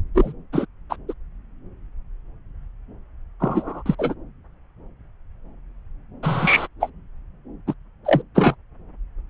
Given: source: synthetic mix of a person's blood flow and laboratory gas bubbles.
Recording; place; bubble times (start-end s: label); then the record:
Doppler ultrasound of blood flow; subclavian vein
0.15-0.33 s: bubbles
0.53-0.66 s: bubbles
0.90-0.96 s: bubbles
1.08-1.14 s: bubbles
3.40-3.83 s: bubbles
3.86-3.95 s: bubbles
3.98-4.15 s: bubbles
6.23-6.67 s: bubbles
6.80-6.90 s: bubbles
7.67-7.74 s: bubbles
8.04-8.22 s: bubbles
8.35-8.55 s: bubbles
From the record:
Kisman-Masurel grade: 223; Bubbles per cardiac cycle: several, 3 to 8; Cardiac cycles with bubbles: 10 to 50%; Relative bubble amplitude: loud (0.450 to 0.775); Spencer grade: 2 (many but less than half of the cardiac periods contain bubble signals, singularly or in groups); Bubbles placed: anywhere in the cardiac cycle